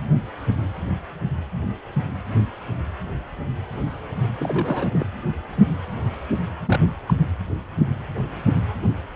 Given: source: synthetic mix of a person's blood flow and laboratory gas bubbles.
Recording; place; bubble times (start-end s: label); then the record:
Doppler ultrasound of blood flow; precordium
4.38-5.05 s: bubbles
6.65-6.80 s: bubbles
7.08-7.13 s: bubbles
From the record:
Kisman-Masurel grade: 221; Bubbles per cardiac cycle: several, 3 to 8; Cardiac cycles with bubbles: 10 to 50%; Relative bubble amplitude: barely perceptible (0.100 to 0.250); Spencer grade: 2 (many but less than half of the cardiac periods contain bubble signals, singularly or in groups); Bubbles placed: anywhere in the cardiac cycle